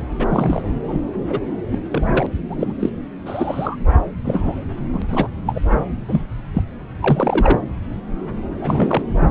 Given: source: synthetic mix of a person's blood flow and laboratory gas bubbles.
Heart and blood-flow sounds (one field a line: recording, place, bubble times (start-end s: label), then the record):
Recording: Doppler ultrasound of blood flow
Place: subclavian vein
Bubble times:
0.18-0.72 s: bubbles
0.86-1.01 s: bubbles
1.30-1.40 s: bubbles
1.71-1.78 s: bubbles
1.91-2.26 s: bubbles
2.49-2.73 s: bubbles
2.79-2.90 s: bubbles
3.25-3.76 s: bubbles
4.24-4.64 s: bubbles
4.93-5.02 s: bubbles
5.10-5.28 s: bubbles
5.47-5.61 s: bubbles
6.08-6.21 s: bubbles
6.53-6.62 s: bubbles
6.99-7.60 s: bubbles
8.61-9.03 s: bubbles
From the record:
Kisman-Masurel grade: 232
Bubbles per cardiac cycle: several, 3 to 8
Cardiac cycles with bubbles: 50 to 99%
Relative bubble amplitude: moderate (0.250 to 0.450)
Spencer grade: 3 (all of the cardiac periods contain showers or single bubble signals, but not dominating or overriding the cardiac motion signals)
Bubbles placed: anywhere in the cardiac cycle